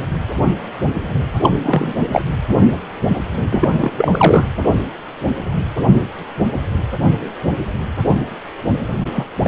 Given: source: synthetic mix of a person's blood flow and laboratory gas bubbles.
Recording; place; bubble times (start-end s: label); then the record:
Doppler ultrasound of blood flow; precordium
1.42-1.50 s: bubbles
1.62-1.93 s: bubbles
2.12-2.22 s: bubbles
3.50-3.92 s: bubbles
3.96-4.47 s: bubbles
9.13-9.27 s: bubbles
9.43-9.48 s: bubbles
From the record:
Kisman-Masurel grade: 223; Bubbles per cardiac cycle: several, 3 to 8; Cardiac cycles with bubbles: 10 to 50%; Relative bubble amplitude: loud (0.450 to 0.775); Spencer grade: 2 (many but less than half of the cardiac periods contain bubble signals, singularly or in groups); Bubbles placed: anywhere in the cardiac cycle